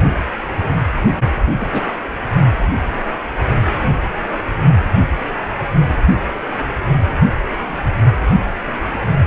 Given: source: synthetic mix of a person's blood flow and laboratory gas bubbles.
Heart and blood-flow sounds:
Doppler ultrasound of blood flow; precordium
1.55-1.66 s: bubbles
1.71-1.83 s: bubbles
From the record:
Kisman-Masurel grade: 113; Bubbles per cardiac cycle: 1 to 2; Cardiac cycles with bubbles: 1 to 10%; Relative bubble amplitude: loud (0.450 to 0.775); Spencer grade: 1 (occasional bubble signal discernible with the cardiac motion signal, with majority of cardiac periods free of bubbles); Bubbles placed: only in the low amplitude regions of the cardiac cycle

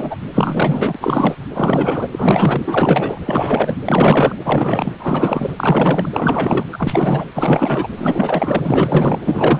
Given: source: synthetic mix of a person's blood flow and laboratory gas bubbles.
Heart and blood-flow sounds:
Doppler ultrasound of blood flow; precordium
0.00-0.16 s: bubbles
0.32-0.98 s: bubbles
1.00-1.34 s: bubbles
1.53-2.08 s: bubbles
2.11-3.20 s: bubbles
3.25-3.76 s: bubbles
3.85-4.40 s: bubbles
4.45-4.91 s: bubbles
4.99-6.09 s: bubbles
6.13-6.66 s: bubbles
6.72-7.24 s: bubbles
7.35-7.88 s: bubbles
7.97-9.20 s: bubbles
9.25-9.60 s: bubbles
From the record:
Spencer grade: 4 (maximum detectable bubble signal sounding continuously throughout systole and diastole of every cardiac period, and overriding the amplitude of the normal cardiac signals); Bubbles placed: anywhere in the cardiac cycle

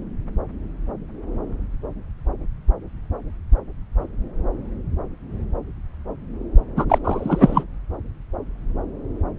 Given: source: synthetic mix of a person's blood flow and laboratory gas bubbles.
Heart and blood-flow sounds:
Doppler ultrasound of blood flow; subclavian vein
6.76-6.85 s: bubbles
6.88-6.98 s: bubbles
7.04-7.63 s: bubbles
From the record:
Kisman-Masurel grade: 213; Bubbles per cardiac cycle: several, 3 to 8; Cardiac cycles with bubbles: 1 to 10%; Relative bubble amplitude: loud (0.450 to 0.775); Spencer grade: 1 (occasional bubble signal discernible with the cardiac motion signal, with majority of cardiac periods free of bubbles); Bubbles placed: anywhere in the cardiac cycle

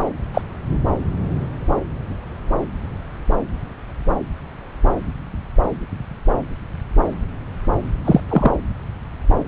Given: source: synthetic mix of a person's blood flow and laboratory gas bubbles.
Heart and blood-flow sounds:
Doppler ultrasound of blood flow; subclavian vein
0.34-0.42 s: bubbles
8.04-8.20 s: bubbles
8.29-8.51 s: bubbles
From the record:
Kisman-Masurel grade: 123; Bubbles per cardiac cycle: 1 to 2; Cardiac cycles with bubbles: 10 to 50%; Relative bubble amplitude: loud (0.450 to 0.775); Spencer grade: 2 (many but less than half of the cardiac periods contain bubble signals, singularly or in groups); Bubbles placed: anywhere in the cardiac cycle

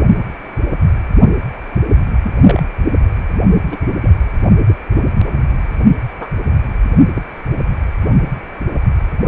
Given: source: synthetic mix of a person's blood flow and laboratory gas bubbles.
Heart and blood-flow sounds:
Doppler ultrasound of blood flow; precordium
2.23-2.32 s: bubbles
2.44-2.61 s: bubbles
3.68-3.77 s: bubbles
4.01-4.11 s: bubbles
4.66-4.75 s: bubbles
6.20-6.29 s: bubbles
6.35-6.42 s: bubbles
6.89-7.10 s: bubbles
7.15-7.23 s: bubbles
From the record:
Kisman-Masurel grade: 122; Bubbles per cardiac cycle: 1 to 2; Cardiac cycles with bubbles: 10 to 50%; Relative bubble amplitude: moderate (0.250 to 0.450); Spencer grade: 2 (many but less than half of the cardiac periods contain bubble signals, singularly or in groups); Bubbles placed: anywhere in the cardiac cycle

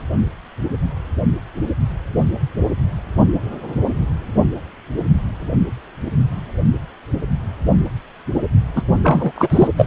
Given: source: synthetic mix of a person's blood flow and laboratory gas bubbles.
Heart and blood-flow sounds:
Doppler ultrasound of blood flow; precordium
8.75-8.82 s: bubbles
9.04-9.31 s: bubbles
9.36-9.68 s: bubbles
9.77-9.87 s: bubbles
From the record:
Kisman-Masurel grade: 213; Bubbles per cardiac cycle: several, 3 to 8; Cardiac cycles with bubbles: 1 to 10%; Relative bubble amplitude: loud (0.450 to 0.775); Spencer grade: 1 (occasional bubble signal discernible with the cardiac motion signal, with majority of cardiac periods free of bubbles); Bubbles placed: only in the low amplitude regions of the cardiac cycle

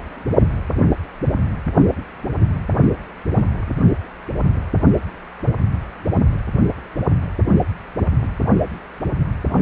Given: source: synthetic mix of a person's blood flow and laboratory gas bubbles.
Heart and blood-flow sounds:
Doppler ultrasound of blood flow; precordium
no bubbles
From the record:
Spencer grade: 0 (complete lack of bubble signals)

